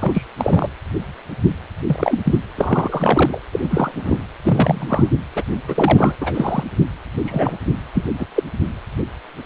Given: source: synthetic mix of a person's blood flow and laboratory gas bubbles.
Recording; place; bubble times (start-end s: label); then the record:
Doppler ultrasound of blood flow; precordium
0.01-0.23 s: bubbles
0.38-0.69 s: bubbles
1.87-2.20 s: bubbles
2.25-2.39 s: bubbles
2.55-3.38 s: bubbles
3.52-3.60 s: bubbles
3.63-3.91 s: bubbles
3.96-4.17 s: bubbles
4.44-5.09 s: bubbles
5.35-5.43 s: bubbles
5.67-6.14 s: bubbles
6.21-6.63 s: bubbles
7.25-7.58 s: bubbles
7.95-8.04 s: bubbles
8.19-8.25 s: bubbles
8.36-8.43 s: bubbles
From the record:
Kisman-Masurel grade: 232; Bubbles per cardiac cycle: several, 3 to 8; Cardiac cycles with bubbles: 50 to 99%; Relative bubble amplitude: moderate (0.250 to 0.450); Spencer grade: 3 (all of the cardiac periods contain showers or single bubble signals, but not dominating or overriding the cardiac motion signals); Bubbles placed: anywhere in the cardiac cycle